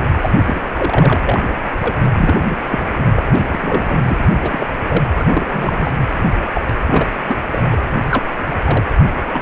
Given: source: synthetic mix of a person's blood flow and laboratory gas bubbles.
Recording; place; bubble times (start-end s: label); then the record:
Doppler ultrasound of blood flow; precordium
0.00-0.07 s: bubbles
0.21-0.29 s: bubbles
0.46-0.61 s: bubbles
0.76-1.17 s: bubbles
1.25-1.40 s: bubbles
1.80-2.03 s: bubbles
2.12-2.35 s: bubbles
2.41-2.58 s: bubbles
2.71-2.83 s: bubbles
3.16-3.23 s: bubbles
3.26-3.48 s: bubbles
3.51-4.17 s: bubbles
4.21-4.37 s: bubbles
4.42-4.67 s: bubbles
4.88-5.02 s: bubbles
5.19-5.25 s: bubbles
5.29-5.91 s: bubbles
6.53-6.62 s: bubbles
6.87-7.10 s: bubbles
7.27-7.37 s: bubbles
7.52-7.80 s: bubbles
8.06-8.23 s: bubbles
8.51-8.56 s: bubbles
8.64-8.84 s: bubbles
9.28-9.42 s: bubbles
From the record:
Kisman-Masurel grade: 242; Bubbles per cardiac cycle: several, 3 to 8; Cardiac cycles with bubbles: 100%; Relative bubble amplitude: moderate (0.250 to 0.450); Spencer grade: 3 (all of the cardiac periods contain showers or single bubble signals, but not dominating or overriding the cardiac motion signals); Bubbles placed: anywhere in the cardiac cycle